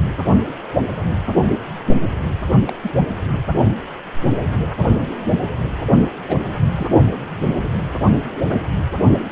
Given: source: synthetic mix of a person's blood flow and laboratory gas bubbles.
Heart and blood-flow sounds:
Doppler ultrasound of blood flow; precordium
2.67-2.73 s: bubbles
2.83-2.92 s: bubbles
6.27-6.37 s: bubbles
6.75-6.87 s: bubbles
From the record:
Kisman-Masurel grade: 121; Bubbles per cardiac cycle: 1 to 2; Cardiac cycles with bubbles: 10 to 50%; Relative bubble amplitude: barely perceptible (0.100 to 0.250); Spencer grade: 2 (many but less than half of the cardiac periods contain bubble signals, singularly or in groups); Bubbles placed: only in the low amplitude regions of the cardiac cycle

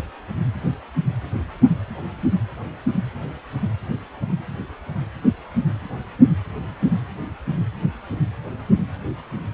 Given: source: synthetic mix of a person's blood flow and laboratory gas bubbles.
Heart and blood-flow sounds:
Doppler ultrasound of blood flow; precordium
no bubbles
From the record:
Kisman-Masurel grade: 000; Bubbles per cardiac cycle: 0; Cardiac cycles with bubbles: 0%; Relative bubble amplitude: no bubbles discernible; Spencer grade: 0 (complete lack of bubble signals)

